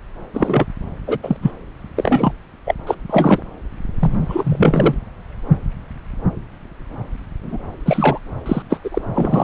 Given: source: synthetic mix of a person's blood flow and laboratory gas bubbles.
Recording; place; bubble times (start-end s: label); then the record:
Doppler ultrasound of blood flow; subclavian vein
0.34-0.66 s: bubbles
1.07-1.18 s: bubbles
1.23-1.36 s: bubbles
1.42-1.52 s: bubbles
1.96-2.33 s: bubbles
2.65-2.75 s: bubbles
2.87-2.95 s: bubbles
3.10-3.43 s: bubbles
4.00-4.94 s: bubbles
7.42-7.57 s: bubbles
7.85-8.19 s: bubbles
8.46-8.62 s: bubbles
8.70-8.80 s: bubbles
8.84-9.02 s: bubbles
9.14-9.44 s: bubbles
From the record:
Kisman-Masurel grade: 233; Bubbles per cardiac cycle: several, 3 to 8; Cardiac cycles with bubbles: 50 to 99%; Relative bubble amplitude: loud (0.450 to 0.775); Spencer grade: 3 (all of the cardiac periods contain showers or single bubble signals, but not dominating or overriding the cardiac motion signals); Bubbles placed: anywhere in the cardiac cycle